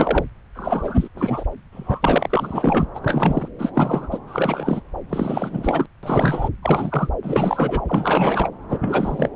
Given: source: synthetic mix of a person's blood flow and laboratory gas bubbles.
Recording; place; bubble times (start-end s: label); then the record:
Doppler ultrasound of blood flow; subclavian vein
0.00-0.24 s: bubbles
0.55-1.08 s: bubbles
1.15-1.44 s: bubbles
1.73-2.86 s: bubbles
2.94-3.48 s: bubbles
3.58-3.72 s: bubbles
3.74-4.08 s: bubbles
4.11-4.18 s: bubbles
4.27-4.81 s: bubbles
5.09-5.86 s: bubbles
6.03-6.49 s: bubbles
6.62-7.09 s: bubbles
7.23-7.81 s: bubbles
7.87-8.49 s: bubbles
8.69-8.79 s: bubbles
8.81-9.29 s: bubbles
From the record:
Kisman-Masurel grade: 343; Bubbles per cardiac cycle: rolling drumbeat, 9 or more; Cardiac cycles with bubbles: 100%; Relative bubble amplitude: loud (0.450 to 0.775); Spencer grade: 3 (all of the cardiac periods contain showers or single bubble signals, but not dominating or overriding the cardiac motion signals); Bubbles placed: anywhere in the cardiac cycle